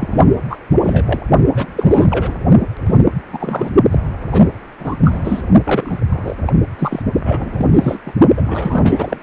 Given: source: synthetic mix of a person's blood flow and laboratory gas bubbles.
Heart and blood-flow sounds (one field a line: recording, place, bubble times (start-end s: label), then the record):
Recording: Doppler ultrasound of blood flow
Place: precordium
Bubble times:
0.00-0.24 s: bubbles
0.49-0.59 s: bubbles
0.84-1.21 s: bubbles
1.55-2.38 s: bubbles
2.80-2.97 s: bubbles
3.32-3.70 s: bubbles
3.90-3.98 s: bubbles
4.31-4.51 s: bubbles
4.79-4.96 s: bubbles
5.04-5.42 s: bubbles
5.64-6.03 s: bubbles
6.11-6.36 s: bubbles
6.46-6.53 s: bubbles
6.79-7.03 s: bubbles
7.14-7.66 s: bubbles
7.72-7.98 s: bubbles
8.05-8.12 s: bubbles
8.37-9.20 s: bubbles
From the record:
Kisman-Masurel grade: 343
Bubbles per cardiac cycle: rolling drumbeat, 9 or more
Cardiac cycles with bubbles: 100%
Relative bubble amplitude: loud (0.450 to 0.775)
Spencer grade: 3 (all of the cardiac periods contain showers or single bubble signals, but not dominating or overriding the cardiac motion signals)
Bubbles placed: only in the low amplitude regions of the cardiac cycle